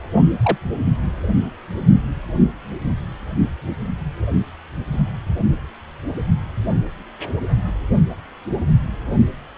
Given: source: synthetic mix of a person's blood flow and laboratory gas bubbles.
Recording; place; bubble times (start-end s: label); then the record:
Doppler ultrasound of blood flow; precordium
0.42-0.57 s: bubbles
From the record:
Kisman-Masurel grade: 123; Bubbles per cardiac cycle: 1 to 2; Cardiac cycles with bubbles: 10 to 50%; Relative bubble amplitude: loud (0.450 to 0.775); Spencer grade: 2 (many but less than half of the cardiac periods contain bubble signals, singularly or in groups); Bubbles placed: only in the low amplitude regions of the cardiac cycle